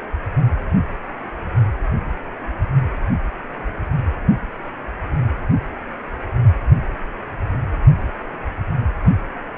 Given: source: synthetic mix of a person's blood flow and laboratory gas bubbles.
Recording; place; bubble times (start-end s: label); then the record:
Doppler ultrasound of blood flow; precordium
0.00-0.04 s: bubbles
From the record:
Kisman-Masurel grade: 111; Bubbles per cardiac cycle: 1 to 2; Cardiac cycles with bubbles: 1 to 10%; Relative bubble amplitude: barely perceptible (0.100 to 0.250); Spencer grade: 1 (occasional bubble signal discernible with the cardiac motion signal, with majority of cardiac periods free of bubbles); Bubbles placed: anywhere in the cardiac cycle